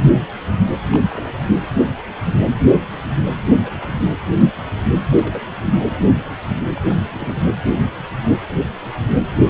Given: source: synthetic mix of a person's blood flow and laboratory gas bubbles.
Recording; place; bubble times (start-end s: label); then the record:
Doppler ultrasound of blood flow; precordium
0.92-0.99 s: bubbles
1.11-1.32 s: bubbles
1.56-1.67 s: bubbles
3.46-3.54 s: bubbles
3.63-3.71 s: bubbles
3.79-4.04 s: bubbles
5.10-5.47 s: bubbles
6.76-6.80 s: bubbles
6.83-7.00 s: bubbles
7.04-7.09 s: bubbles
7.13-7.43 s: bubbles
From the record:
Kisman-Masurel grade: 221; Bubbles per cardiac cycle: several, 3 to 8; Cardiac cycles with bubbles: 10 to 50%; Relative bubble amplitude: barely perceptible (0.100 to 0.250); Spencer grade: 2 (many but less than half of the cardiac periods contain bubble signals, singularly or in groups); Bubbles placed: anywhere in the cardiac cycle